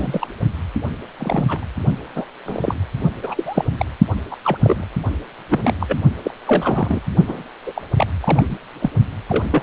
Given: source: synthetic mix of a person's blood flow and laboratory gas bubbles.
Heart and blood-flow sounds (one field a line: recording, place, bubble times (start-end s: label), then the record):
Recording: Doppler ultrasound of blood flow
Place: precordium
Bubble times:
0.00-0.27 s: bubbles
1.19-1.67 s: bubbles
2.16-2.25 s: bubbles
2.45-2.75 s: bubbles
3.23-3.65 s: bubbles
3.77-3.85 s: bubbles
4.30-4.36 s: bubbles
4.44-4.58 s: bubbles
4.63-4.84 s: bubbles
5.50-5.75 s: bubbles
5.79-5.99 s: bubbles
6.23-6.31 s: bubbles
6.46-7.00 s: bubbles
7.26-7.42 s: bubbles
7.67-7.82 s: bubbles
7.97-8.06 s: bubbles
8.21-8.57 s: bubbles
8.79-8.90 s: bubbles
9.29-9.46 s: bubbles
9.50-9.63 s: bubbles
From the record:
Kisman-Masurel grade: 242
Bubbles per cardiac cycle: several, 3 to 8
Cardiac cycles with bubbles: 100%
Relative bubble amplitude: moderate (0.250 to 0.450)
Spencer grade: 3 (all of the cardiac periods contain showers or single bubble signals, but not dominating or overriding the cardiac motion signals)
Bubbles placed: only in the low amplitude regions of the cardiac cycle